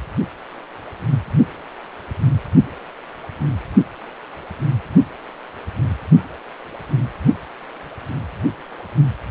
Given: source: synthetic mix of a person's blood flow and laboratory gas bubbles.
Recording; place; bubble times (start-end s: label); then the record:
Doppler ultrasound of blood flow; precordium
no bubbles
From the record:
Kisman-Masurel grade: 000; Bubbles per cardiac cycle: 0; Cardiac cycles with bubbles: 0%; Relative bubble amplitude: no bubbles discernible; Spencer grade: 0 (complete lack of bubble signals)